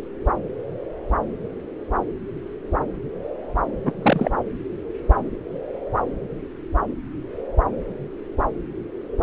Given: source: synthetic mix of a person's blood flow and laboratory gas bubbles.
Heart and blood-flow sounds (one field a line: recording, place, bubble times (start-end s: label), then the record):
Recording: Doppler ultrasound of blood flow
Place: subclavian vein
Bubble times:
3.85-3.92 s: bubbles
4.03-4.31 s: bubbles
From the record:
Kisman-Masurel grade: 212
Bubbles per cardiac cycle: several, 3 to 8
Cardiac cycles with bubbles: 1 to 10%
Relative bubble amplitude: moderate (0.250 to 0.450)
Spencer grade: 1 (occasional bubble signal discernible with the cardiac motion signal, with majority of cardiac periods free of bubbles)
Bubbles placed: anywhere in the cardiac cycle